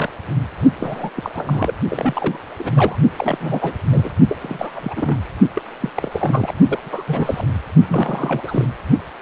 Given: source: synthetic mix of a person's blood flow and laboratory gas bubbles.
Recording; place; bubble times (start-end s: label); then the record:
Doppler ultrasound of blood flow; precordium
0.00-0.11 s: bubbles
0.79-1.09 s: bubbles
1.16-1.74 s: bubbles
1.89-2.38 s: bubbles
2.58-2.96 s: bubbles
3.17-3.78 s: bubbles
3.92-4.10 s: bubbles
4.28-4.37 s: bubbles
4.41-5.16 s: bubbles
5.54-5.62 s: bubbles
5.80-5.90 s: bubbles
5.95-6.53 s: bubbles
6.67-6.79 s: bubbles
6.83-7.03 s: bubbles
7.07-7.47 s: bubbles
7.87-8.67 s: bubbles
From the record:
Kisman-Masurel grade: 342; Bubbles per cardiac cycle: rolling drumbeat, 9 or more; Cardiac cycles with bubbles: 100%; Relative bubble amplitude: moderate (0.250 to 0.450); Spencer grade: 3 (all of the cardiac periods contain showers or single bubble signals, but not dominating or overriding the cardiac motion signals); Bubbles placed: only in the low amplitude regions of the cardiac cycle